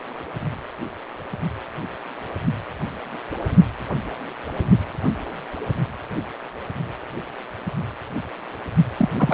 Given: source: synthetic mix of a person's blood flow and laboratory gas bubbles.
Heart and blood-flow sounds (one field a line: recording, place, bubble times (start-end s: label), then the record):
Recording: Doppler ultrasound of blood flow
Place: precordium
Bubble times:
8.97-9.09 s: bubbles
9.14-9.34 s: bubbles
From the record:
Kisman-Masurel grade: 212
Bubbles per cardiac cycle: several, 3 to 8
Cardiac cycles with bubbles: 1 to 10%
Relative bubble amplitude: moderate (0.250 to 0.450)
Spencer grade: 1 (occasional bubble signal discernible with the cardiac motion signal, with majority of cardiac periods free of bubbles)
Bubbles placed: only in the low amplitude regions of the cardiac cycle